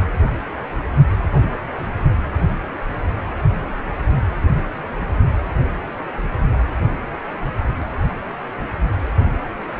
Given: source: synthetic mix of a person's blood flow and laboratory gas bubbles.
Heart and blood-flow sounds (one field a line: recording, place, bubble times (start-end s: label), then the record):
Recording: Doppler ultrasound of blood flow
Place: precordium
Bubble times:
no bubbles
From the record:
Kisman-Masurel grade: 000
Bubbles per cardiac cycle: 0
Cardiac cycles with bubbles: 0%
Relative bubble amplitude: no bubbles discernible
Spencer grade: 0 (complete lack of bubble signals)